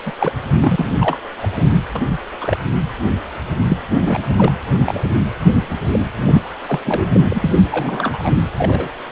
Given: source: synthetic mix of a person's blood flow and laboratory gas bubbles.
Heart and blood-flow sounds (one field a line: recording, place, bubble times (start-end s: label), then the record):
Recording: Doppler ultrasound of blood flow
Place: precordium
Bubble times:
0.05-0.11 s: bubbles
0.19-0.32 s: bubbles
0.55-0.87 s: bubbles
0.99-1.17 s: bubbles
1.42-1.48 s: bubbles
1.56-1.73 s: bubbles
1.95-2.02 s: bubbles
2.41-2.57 s: bubbles
3.67-3.78 s: bubbles
4.01-4.53 s: bubbles
4.86-5.03 s: bubbles
5.92-6.00 s: bubbles
6.18-6.42 s: bubbles
6.67-6.79 s: bubbles
6.84-7.21 s: bubbles
7.29-7.55 s: bubbles
7.71-8.31 s: bubbles
8.58-8.89 s: bubbles
From the record:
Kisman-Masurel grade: 242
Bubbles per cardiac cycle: several, 3 to 8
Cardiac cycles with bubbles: 100%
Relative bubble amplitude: moderate (0.250 to 0.450)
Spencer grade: 3 (all of the cardiac periods contain showers or single bubble signals, but not dominating or overriding the cardiac motion signals)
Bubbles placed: anywhere in the cardiac cycle